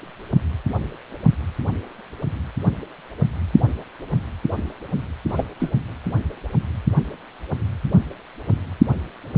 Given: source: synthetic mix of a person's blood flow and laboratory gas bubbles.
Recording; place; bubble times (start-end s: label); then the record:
Doppler ultrasound of blood flow; precordium
5.29-5.43 s: bubbles
5.59-5.72 s: bubbles
From the record:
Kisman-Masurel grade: 112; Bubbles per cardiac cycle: 1 to 2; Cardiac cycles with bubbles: 1 to 10%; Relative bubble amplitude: moderate (0.250 to 0.450); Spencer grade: 1 (occasional bubble signal discernible with the cardiac motion signal, with majority of cardiac periods free of bubbles); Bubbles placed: anywhere in the cardiac cycle